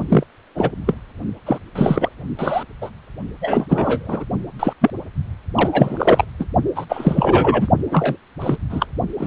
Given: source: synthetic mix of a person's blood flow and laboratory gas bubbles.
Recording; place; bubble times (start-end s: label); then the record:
Doppler ultrasound of blood flow; precordium
0.08-0.23 s: bubbles
0.55-0.70 s: bubbles
0.86-0.94 s: bubbles
1.45-1.58 s: bubbles
1.75-2.09 s: bubbles
2.39-2.63 s: bubbles
2.81-2.90 s: bubbles
3.41-4.25 s: bubbles
4.59-4.73 s: bubbles
4.81-4.91 s: bubbles
5.54-6.25 s: bubbles
6.39-6.45 s: bubbles
6.75-6.85 s: bubbles
6.89-7.68 s: bubbles
7.90-8.17 s: bubbles
8.40-8.57 s: bubbles
8.69-8.86 s: bubbles
9.18-9.27 s: bubbles
From the record:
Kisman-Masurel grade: 243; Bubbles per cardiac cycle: several, 3 to 8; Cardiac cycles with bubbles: 100%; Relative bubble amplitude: loud (0.450 to 0.775); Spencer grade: 3 (all of the cardiac periods contain showers or single bubble signals, but not dominating or overriding the cardiac motion signals); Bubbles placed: only in the low amplitude regions of the cardiac cycle